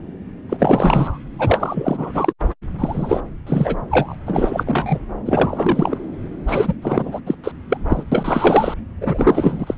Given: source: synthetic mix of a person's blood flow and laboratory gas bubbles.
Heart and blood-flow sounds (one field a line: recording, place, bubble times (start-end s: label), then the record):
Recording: Doppler ultrasound of blood flow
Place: subclavian vein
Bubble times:
0.49-1.18 s: bubbles
1.39-2.33 s: bubbles
2.79-3.21 s: bubbles
3.47-3.76 s: bubbles
3.91-4.15 s: bubbles
4.25-5.00 s: bubbles
5.25-5.98 s: bubbles
6.47-6.74 s: bubbles
6.81-7.20 s: bubbles
7.26-7.34 s: bubbles
7.43-7.51 s: bubbles
7.69-7.77 s: bubbles
7.88-8.03 s: bubbles
8.12-8.74 s: bubbles
9.01-9.75 s: bubbles
From the record:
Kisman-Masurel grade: 333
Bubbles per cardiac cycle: rolling drumbeat, 9 or more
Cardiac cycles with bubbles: 50 to 99%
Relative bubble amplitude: loud (0.450 to 0.775)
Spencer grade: 3 (all of the cardiac periods contain showers or single bubble signals, but not dominating or overriding the cardiac motion signals)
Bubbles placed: anywhere in the cardiac cycle